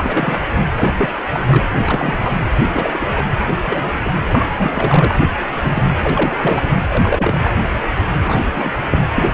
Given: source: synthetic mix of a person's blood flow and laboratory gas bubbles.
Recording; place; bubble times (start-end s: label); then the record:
Doppler ultrasound of blood flow; precordium
0.00-0.43 s: bubbles
0.77-0.94 s: bubbles
0.98-1.09 s: bubbles
1.31-1.66 s: bubbles
1.76-2.35 s: bubbles
2.73-3.11 s: bubbles
3.15-3.25 s: bubbles
3.48-3.53 s: bubbles
3.65-3.90 s: bubbles
4.04-4.11 s: bubbles
4.27-4.47 s: bubbles
4.52-5.14 s: bubbles
5.50-5.87 s: bubbles
6.00-6.77 s: bubbles
6.88-7.51 s: bubbles
8.17-8.42 s: bubbles
8.54-8.72 s: bubbles
8.90-8.97 s: bubbles
9.11-9.34 s: bubbles
From the record:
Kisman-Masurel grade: 242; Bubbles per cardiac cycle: several, 3 to 8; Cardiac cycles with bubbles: 100%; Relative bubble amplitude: moderate (0.250 to 0.450); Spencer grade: 3 (all of the cardiac periods contain showers or single bubble signals, but not dominating or overriding the cardiac motion signals); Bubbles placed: anywhere in the cardiac cycle